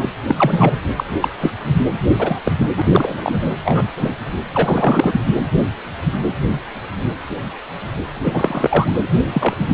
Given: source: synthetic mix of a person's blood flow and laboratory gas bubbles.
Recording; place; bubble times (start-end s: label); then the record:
Doppler ultrasound of blood flow; precordium
0.00-0.09 s: bubbles
0.28-0.35 s: bubbles
0.38-0.77 s: bubbles
0.97-1.04 s: bubbles
1.22-1.29 s: bubbles
1.41-1.54 s: bubbles
2.18-2.38 s: bubbles
2.44-2.51 s: bubbles
2.58-2.67 s: bubbles
2.76-2.82 s: bubbles
2.92-3.51 s: bubbles
3.65-3.88 s: bubbles
3.96-4.15 s: bubbles
4.52-5.20 s: bubbles
8.24-8.94 s: bubbles
9.33-9.54 s: bubbles
9.68-9.74 s: bubbles
From the record:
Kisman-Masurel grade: 233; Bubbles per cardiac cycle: several, 3 to 8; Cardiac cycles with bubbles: 50 to 99%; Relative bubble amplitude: loud (0.450 to 0.775); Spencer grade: 3 (all of the cardiac periods contain showers or single bubble signals, but not dominating or overriding the cardiac motion signals); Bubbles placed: anywhere in the cardiac cycle